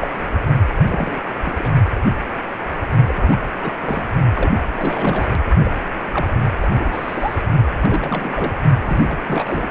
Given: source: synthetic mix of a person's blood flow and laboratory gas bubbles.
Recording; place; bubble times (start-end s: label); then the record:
Doppler ultrasound of blood flow; precordium
0.00-0.07 s: bubbles
0.14-0.27 s: bubbles
0.69-0.76 s: bubbles
0.86-1.20 s: bubbles
1.44-1.54 s: bubbles
1.58-1.70 s: bubbles
3.07-3.40 s: bubbles
3.60-3.73 s: bubbles
3.81-4.10 s: bubbles
4.34-4.60 s: bubbles
4.74-5.26 s: bubbles
5.64-5.71 s: bubbles
6.13-6.27 s: bubbles
6.61-6.70 s: bubbles
6.79-7.41 s: bubbles
7.80-8.54 s: bubbles
8.84-9.18 s: bubbles
9.25-9.68 s: bubbles
From the record:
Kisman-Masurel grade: 332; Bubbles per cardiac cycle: rolling drumbeat, 9 or more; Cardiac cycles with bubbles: 50 to 99%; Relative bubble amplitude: moderate (0.250 to 0.450); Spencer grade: 3 (all of the cardiac periods contain showers or single bubble signals, but not dominating or overriding the cardiac motion signals); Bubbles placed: only in the low amplitude regions of the cardiac cycle